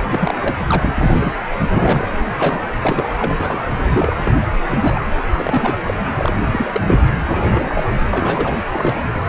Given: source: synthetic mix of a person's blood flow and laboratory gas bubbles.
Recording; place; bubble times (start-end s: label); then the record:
Doppler ultrasound of blood flow; precordium
0.11-0.35 s: bubbles
0.40-0.58 s: bubbles
0.67-1.11 s: bubbles
1.21-1.33 s: bubbles
1.50-1.55 s: bubbles
1.71-2.10 s: bubbles
2.37-2.61 s: bubbles
2.81-3.34 s: bubbles
3.37-3.63 s: bubbles
3.93-4.16 s: bubbles
4.25-4.32 s: bubbles
4.67-5.04 s: bubbles
5.29-5.76 s: bubbles
5.87-5.94 s: bubbles
6.17-6.39 s: bubbles
6.46-6.82 s: bubbles
6.84-6.99 s: bubbles
7.29-7.85 s: bubbles
8.12-8.60 s: bubbles
8.72-8.96 s: bubbles
9.03-9.22 s: bubbles
From the record:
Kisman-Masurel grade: 242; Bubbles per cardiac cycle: several, 3 to 8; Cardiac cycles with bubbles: 100%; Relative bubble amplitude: moderate (0.250 to 0.450); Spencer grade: 3 (all of the cardiac periods contain showers or single bubble signals, but not dominating or overriding the cardiac motion signals); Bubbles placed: anywhere in the cardiac cycle